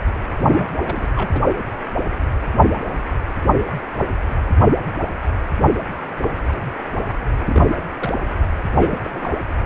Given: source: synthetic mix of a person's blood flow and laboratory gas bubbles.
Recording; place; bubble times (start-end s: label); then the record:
Doppler ultrasound of blood flow; precordium
0.39-0.68 s: bubbles
0.86-1.10 s: bubbles
1.16-1.30 s: bubbles
1.32-1.41 s: bubbles
7.46-7.73 s: bubbles
8.00-8.12 s: bubbles
8.71-8.98 s: bubbles
9.04-9.30 s: bubbles
From the record:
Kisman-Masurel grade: 221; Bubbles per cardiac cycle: several, 3 to 8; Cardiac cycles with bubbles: 10 to 50%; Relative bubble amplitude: barely perceptible (0.100 to 0.250); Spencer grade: 2 (many but less than half of the cardiac periods contain bubble signals, singularly or in groups); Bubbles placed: anywhere in the cardiac cycle